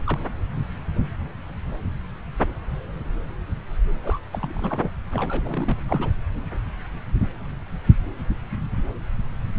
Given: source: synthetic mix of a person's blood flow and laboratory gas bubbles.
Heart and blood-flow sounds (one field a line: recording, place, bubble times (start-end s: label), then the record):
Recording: Doppler ultrasound of blood flow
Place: subclavian vein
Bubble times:
0.04-0.19 s: bubbles
4.04-4.19 s: bubbles
4.32-4.90 s: bubbles
5.11-5.77 s: bubbles
5.88-6.10 s: bubbles
From the record:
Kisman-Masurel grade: 221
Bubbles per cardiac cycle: several, 3 to 8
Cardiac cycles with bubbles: 10 to 50%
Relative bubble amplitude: barely perceptible (0.100 to 0.250)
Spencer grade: 2 (many but less than half of the cardiac periods contain bubble signals, singularly or in groups)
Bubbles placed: anywhere in the cardiac cycle